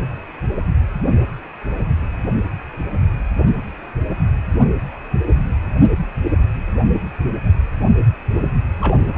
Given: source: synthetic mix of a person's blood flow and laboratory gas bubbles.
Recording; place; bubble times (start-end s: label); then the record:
Doppler ultrasound of blood flow; precordium
8.79-9.01 s: bubbles
9.14-9.18 s: bubbles
From the record:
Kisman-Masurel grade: 122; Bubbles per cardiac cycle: 1 to 2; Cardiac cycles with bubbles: 10 to 50%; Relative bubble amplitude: moderate (0.250 to 0.450); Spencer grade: 2 (many but less than half of the cardiac periods contain bubble signals, singularly or in groups); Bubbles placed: anywhere in the cardiac cycle